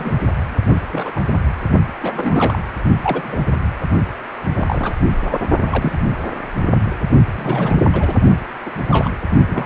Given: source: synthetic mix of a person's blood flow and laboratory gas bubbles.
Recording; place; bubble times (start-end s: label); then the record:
Doppler ultrasound of blood flow; precordium
0.00-0.12 s: bubbles
0.69-0.81 s: bubbles
0.91-1.20 s: bubbles
2.03-2.59 s: bubbles
3.04-3.37 s: bubbles
4.54-4.95 s: bubbles
5.23-5.38 s: bubbles
5.60-5.97 s: bubbles
6.07-6.13 s: bubbles
7.36-7.83 s: bubbles
7.92-8.14 s: bubbles
8.65-8.70 s: bubbles
8.89-9.09 s: bubbles
9.49-9.65 s: bubbles
From the record:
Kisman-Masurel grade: 242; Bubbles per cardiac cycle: several, 3 to 8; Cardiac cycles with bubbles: 100%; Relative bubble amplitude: moderate (0.250 to 0.450); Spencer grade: 3 (all of the cardiac periods contain showers or single bubble signals, but not dominating or overriding the cardiac motion signals); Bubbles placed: only in the low amplitude regions of the cardiac cycle